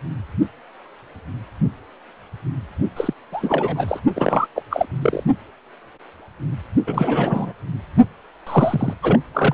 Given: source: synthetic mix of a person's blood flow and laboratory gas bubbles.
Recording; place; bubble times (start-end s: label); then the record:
Doppler ultrasound of blood flow; precordium
2.96-3.13 s: bubbles
3.32-4.00 s: bubbles
4.16-4.47 s: bubbles
4.55-4.62 s: bubbles
4.70-4.86 s: bubbles
5.02-5.23 s: bubbles
6.87-7.53 s: bubbles
8.46-8.94 s: bubbles
9.02-9.19 s: bubbles
9.34-9.54 s: bubbles
From the record:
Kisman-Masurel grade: 332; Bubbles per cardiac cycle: rolling drumbeat, 9 or more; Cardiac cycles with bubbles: 50 to 99%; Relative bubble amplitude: moderate (0.250 to 0.450); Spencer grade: 3 (all of the cardiac periods contain showers or single bubble signals, but not dominating or overriding the cardiac motion signals); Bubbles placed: only in the low amplitude regions of the cardiac cycle